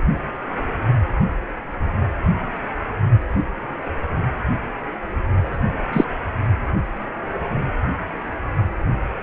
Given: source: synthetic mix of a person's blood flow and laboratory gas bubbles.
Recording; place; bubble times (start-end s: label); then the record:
Doppler ultrasound of blood flow; precordium
5.92-6.04 s: bubbles
From the record:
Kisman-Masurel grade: 113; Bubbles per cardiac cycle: 1 to 2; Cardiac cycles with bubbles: 1 to 10%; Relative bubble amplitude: loud (0.450 to 0.775); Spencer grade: 1 (occasional bubble signal discernible with the cardiac motion signal, with majority of cardiac periods free of bubbles); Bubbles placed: only in the low amplitude regions of the cardiac cycle